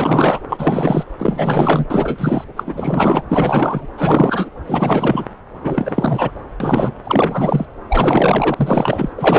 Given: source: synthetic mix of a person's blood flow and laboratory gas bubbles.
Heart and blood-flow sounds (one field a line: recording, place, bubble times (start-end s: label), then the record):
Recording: Doppler ultrasound of blood flow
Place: subclavian vein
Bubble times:
0.00-0.40 s: bubbles
0.49-1.04 s: bubbles
1.18-1.85 s: bubbles
1.90-2.45 s: bubbles
2.56-2.64 s: bubbles
2.67-3.23 s: bubbles
3.29-3.87 s: bubbles
3.97-4.50 s: bubbles
4.67-5.25 s: bubbles
5.63-6.31 s: bubbles
6.60-6.91 s: bubbles
7.04-7.65 s: bubbles
7.89-9.09 s: bubbles
9.17-9.39 s: bubbles
From the record:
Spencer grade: 4 (maximum detectable bubble signal sounding continuously throughout systole and diastole of every cardiac period, and overriding the amplitude of the normal cardiac signals)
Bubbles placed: anywhere in the cardiac cycle